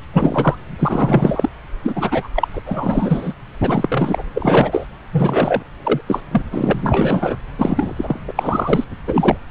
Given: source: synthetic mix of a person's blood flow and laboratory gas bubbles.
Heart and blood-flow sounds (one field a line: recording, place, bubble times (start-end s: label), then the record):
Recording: Doppler ultrasound of blood flow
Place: subclavian vein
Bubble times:
0.13-0.57 s: bubbles
0.79-1.49 s: bubbles
1.83-2.27 s: bubbles
2.35-2.48 s: bubbles
2.53-2.61 s: bubbles
2.65-3.33 s: bubbles
3.61-4.23 s: bubbles
4.34-4.87 s: bubbles
5.12-5.62 s: bubbles
5.83-6.00 s: bubbles
6.07-6.21 s: bubbles
6.31-6.42 s: bubbles
6.50-6.74 s: bubbles
6.76-7.37 s: bubbles
7.55-8.20 s: bubbles
8.28-8.33 s: bubbles
8.35-8.85 s: bubbles
9.07-9.37 s: bubbles
From the record:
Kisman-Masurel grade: 343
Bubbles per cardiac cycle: rolling drumbeat, 9 or more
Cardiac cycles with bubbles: 100%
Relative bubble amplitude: loud (0.450 to 0.775)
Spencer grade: 3 (all of the cardiac periods contain showers or single bubble signals, but not dominating or overriding the cardiac motion signals)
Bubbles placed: anywhere in the cardiac cycle